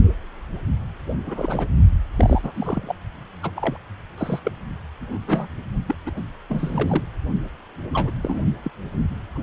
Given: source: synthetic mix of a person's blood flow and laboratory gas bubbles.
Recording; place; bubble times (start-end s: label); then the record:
Doppler ultrasound of blood flow; precordium
1.25-1.68 s: bubbles
2.16-2.51 s: bubbles
2.54-2.95 s: bubbles
3.42-3.50 s: bubbles
3.55-3.77 s: bubbles
4.17-4.40 s: bubbles
4.44-4.51 s: bubbles
5.00-5.48 s: bubbles
5.86-5.95 s: bubbles
6.05-6.11 s: bubbles
6.16-6.22 s: bubbles
6.48-7.04 s: bubbles
7.93-8.11 s: bubbles
8.23-8.40 s: bubbles
8.64-8.71 s: bubbles
9.35-9.43 s: bubbles
From the record:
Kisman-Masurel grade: 242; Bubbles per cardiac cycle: several, 3 to 8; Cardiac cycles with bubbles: 100%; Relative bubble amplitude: moderate (0.250 to 0.450); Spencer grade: 3 (all of the cardiac periods contain showers or single bubble signals, but not dominating or overriding the cardiac motion signals); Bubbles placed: only in the low amplitude regions of the cardiac cycle